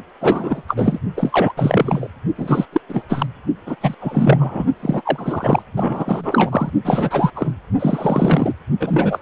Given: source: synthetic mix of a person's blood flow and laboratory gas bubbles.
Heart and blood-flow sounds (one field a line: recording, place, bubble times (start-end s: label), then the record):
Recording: Doppler ultrasound of blood flow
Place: precordium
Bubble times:
0.21-0.62 s: bubbles
0.68-1.00 s: bubbles
1.17-1.53 s: bubbles
1.57-2.07 s: bubbles
2.38-2.66 s: bubbles
2.72-2.81 s: bubbles
2.88-3.04 s: bubbles
3.09-3.26 s: bubbles
3.66-3.75 s: bubbles
3.81-3.94 s: bubbles
4.00-4.66 s: bubbles
4.81-5.01 s: bubbles
5.05-5.62 s: bubbles
5.76-6.71 s: bubbles
6.84-7.30 s: bubbles
7.35-7.51 s: bubbles
7.79-8.53 s: bubbles
8.80-9.19 s: bubbles
From the record:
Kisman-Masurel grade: 343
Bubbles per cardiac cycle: rolling drumbeat, 9 or more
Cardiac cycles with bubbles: 100%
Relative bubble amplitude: loud (0.450 to 0.775)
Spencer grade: 3 (all of the cardiac periods contain showers or single bubble signals, but not dominating or overriding the cardiac motion signals)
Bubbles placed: only in the low amplitude regions of the cardiac cycle